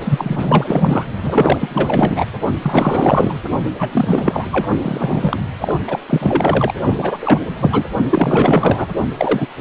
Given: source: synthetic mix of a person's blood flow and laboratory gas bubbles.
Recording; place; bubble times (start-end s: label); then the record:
Doppler ultrasound of blood flow; precordium
0.00-1.05 s: bubbles
1.23-2.25 s: bubbles
2.62-3.40 s: bubbles
3.79-4.48 s: bubbles
4.51-4.67 s: bubbles
4.81-5.39 s: bubbles
5.62-5.75 s: bubbles
5.88-5.99 s: bubbles
6.09-6.73 s: bubbles
6.97-7.40 s: bubbles
7.59-7.83 s: bubbles
8.10-8.87 s: bubbles
9.17-9.46 s: bubbles
From the record:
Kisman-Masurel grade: 444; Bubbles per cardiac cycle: continuous sound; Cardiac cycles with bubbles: 100%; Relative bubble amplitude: maximal (0.775 to 0.999); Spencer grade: 4 (maximum detectable bubble signal sounding continuously throughout systole and diastole of every cardiac period, and overriding the amplitude of the normal cardiac signals); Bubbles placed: only in the low amplitude regions of the cardiac cycle